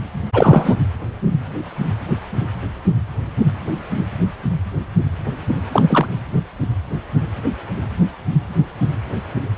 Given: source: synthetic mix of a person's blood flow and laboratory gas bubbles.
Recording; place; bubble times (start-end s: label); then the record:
Doppler ultrasound of blood flow; precordium
0.33-0.76 s: bubbles
5.72-6.06 s: bubbles
From the record:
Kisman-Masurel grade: 213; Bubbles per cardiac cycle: several, 3 to 8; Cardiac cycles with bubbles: 1 to 10%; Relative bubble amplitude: loud (0.450 to 0.775); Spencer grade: 1 (occasional bubble signal discernible with the cardiac motion signal, with majority of cardiac periods free of bubbles); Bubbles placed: anywhere in the cardiac cycle